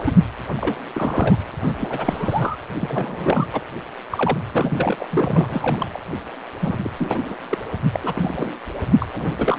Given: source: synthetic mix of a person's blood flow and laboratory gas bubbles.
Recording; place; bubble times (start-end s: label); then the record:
Doppler ultrasound of blood flow; precordium
0.04-0.14 s: bubbles
0.56-0.80 s: bubbles
0.93-1.36 s: bubbles
1.67-1.75 s: bubbles
1.78-2.56 s: bubbles
2.79-3.47 s: bubbles
3.52-3.61 s: bubbles
4.10-4.38 s: bubbles
4.53-5.08 s: bubbles
5.11-6.00 s: bubbles
6.59-6.76 s: bubbles
6.83-6.91 s: bubbles
6.97-7.36 s: bubbles
7.50-7.58 s: bubbles
7.93-8.00 s: bubbles
8.03-8.54 s: bubbles
8.99-9.36 s: bubbles
9.39-9.59 s: bubbles
From the record:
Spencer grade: 3 (all of the cardiac periods contain showers or single bubble signals, but not dominating or overriding the cardiac motion signals); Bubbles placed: anywhere in the cardiac cycle